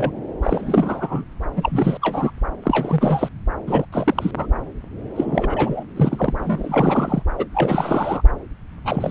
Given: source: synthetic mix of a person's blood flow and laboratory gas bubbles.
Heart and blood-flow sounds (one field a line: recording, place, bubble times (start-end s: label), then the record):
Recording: Doppler ultrasound of blood flow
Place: subclavian vein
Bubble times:
0.00-0.18 s: bubbles
0.43-1.25 s: bubbles
1.56-1.97 s: bubbles
2.01-2.30 s: bubbles
2.62-3.28 s: bubbles
3.67-3.85 s: bubbles
3.92-4.31 s: bubbles
4.37-4.46 s: bubbles
5.16-5.83 s: bubbles
5.96-6.37 s: bubbles
6.39-7.23 s: bubbles
7.38-7.46 s: bubbles
7.52-8.22 s: bubbles
8.85-9.11 s: bubbles
From the record:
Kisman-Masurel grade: 343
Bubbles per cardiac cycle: rolling drumbeat, 9 or more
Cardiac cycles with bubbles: 100%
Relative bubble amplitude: loud (0.450 to 0.775)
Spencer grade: 3 (all of the cardiac periods contain showers or single bubble signals, but not dominating or overriding the cardiac motion signals)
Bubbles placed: anywhere in the cardiac cycle